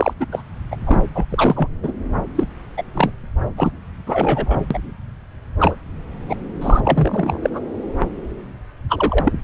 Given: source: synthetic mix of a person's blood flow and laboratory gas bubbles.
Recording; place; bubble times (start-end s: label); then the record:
Doppler ultrasound of blood flow; subclavian vein
0.00-0.14 s: bubbles
0.20-0.26 s: bubbles
0.32-0.42 s: bubbles
0.71-0.76 s: bubbles
0.86-0.96 s: bubbles
1.15-1.25 s: bubbles
1.30-1.69 s: bubbles
1.83-1.93 s: bubbles
2.35-2.46 s: bubbles
2.77-2.83 s: bubbles
2.94-3.11 s: bubbles
3.57-3.72 s: bubbles
4.07-4.58 s: bubbles
4.71-4.79 s: bubbles
5.59-5.76 s: bubbles
6.28-6.36 s: bubbles
6.61-6.81 s: bubbles
6.85-7.61 s: bubbles
8.89-9.32 s: bubbles
From the record:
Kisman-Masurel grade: 243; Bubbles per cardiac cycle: several, 3 to 8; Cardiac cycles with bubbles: 100%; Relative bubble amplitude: loud (0.450 to 0.775); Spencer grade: 3 (all of the cardiac periods contain showers or single bubble signals, but not dominating or overriding the cardiac motion signals); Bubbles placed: anywhere in the cardiac cycle